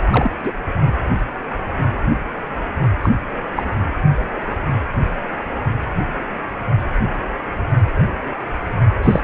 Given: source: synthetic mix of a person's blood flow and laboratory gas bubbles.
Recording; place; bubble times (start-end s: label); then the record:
Doppler ultrasound of blood flow; precordium
0.11-0.29 s: bubbles
0.43-0.53 s: bubbles
3.02-3.15 s: bubbles
3.56-3.63 s: bubbles
9.03-9.21 s: bubbles
From the record:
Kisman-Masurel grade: 223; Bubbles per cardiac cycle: several, 3 to 8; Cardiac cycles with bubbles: 10 to 50%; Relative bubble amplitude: loud (0.450 to 0.775); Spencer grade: 2 (many but less than half of the cardiac periods contain bubble signals, singularly or in groups); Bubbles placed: anywhere in the cardiac cycle